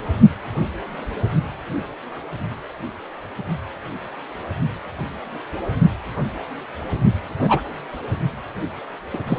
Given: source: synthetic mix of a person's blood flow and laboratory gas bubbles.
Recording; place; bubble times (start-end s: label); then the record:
Doppler ultrasound of blood flow; precordium
7.41-7.61 s: bubbles
9.13-9.23 s: bubbles
9.27-9.39 s: bubbles
From the record:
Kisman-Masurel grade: 122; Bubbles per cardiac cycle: 1 to 2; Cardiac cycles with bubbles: 10 to 50%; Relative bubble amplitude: moderate (0.250 to 0.450); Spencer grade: 2 (many but less than half of the cardiac periods contain bubble signals, singularly or in groups); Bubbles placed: only in the low amplitude regions of the cardiac cycle